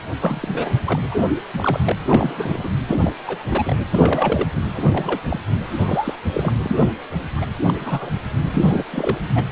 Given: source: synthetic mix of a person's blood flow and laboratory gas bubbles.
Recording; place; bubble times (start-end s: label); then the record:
Doppler ultrasound of blood flow; precordium
0.19-0.48 s: bubbles
0.53-0.74 s: bubbles
0.84-0.99 s: bubbles
1.11-1.21 s: bubbles
1.54-1.79 s: bubbles
1.83-1.92 s: bubbles
2.07-2.69 s: bubbles
2.87-2.98 s: bubbles
3.01-3.13 s: bubbles
3.25-3.44 s: bubbles
3.51-3.76 s: bubbles
3.91-4.47 s: bubbles
4.56-4.62 s: bubbles
4.74-5.20 s: bubbles
5.28-5.40 s: bubbles
5.66-6.16 s: bubbles
6.33-6.53 s: bubbles
6.62-6.90 s: bubbles
7.36-7.46 s: bubbles
7.67-8.11 s: bubbles
8.46-8.85 s: bubbles
8.91-9.16 s: bubbles
9.35-9.44 s: bubbles
From the record:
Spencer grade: 3 (all of the cardiac periods contain showers or single bubble signals, but not dominating or overriding the cardiac motion signals); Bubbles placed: anywhere in the cardiac cycle